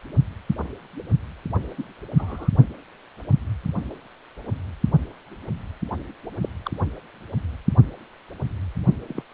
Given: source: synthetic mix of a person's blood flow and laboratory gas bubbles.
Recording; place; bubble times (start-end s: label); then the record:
Doppler ultrasound of blood flow; precordium
1.77-1.83 s: bubbles
2.18-2.50 s: bubbles
6.42-6.49 s: bubbles
6.65-6.71 s: bubbles
9.08-9.22 s: bubbles
From the record:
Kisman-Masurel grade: 121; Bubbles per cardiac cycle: 1 to 2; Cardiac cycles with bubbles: 10 to 50%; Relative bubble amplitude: barely perceptible (0.100 to 0.250); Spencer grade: 2 (many but less than half of the cardiac periods contain bubble signals, singularly or in groups); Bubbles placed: only in the low amplitude regions of the cardiac cycle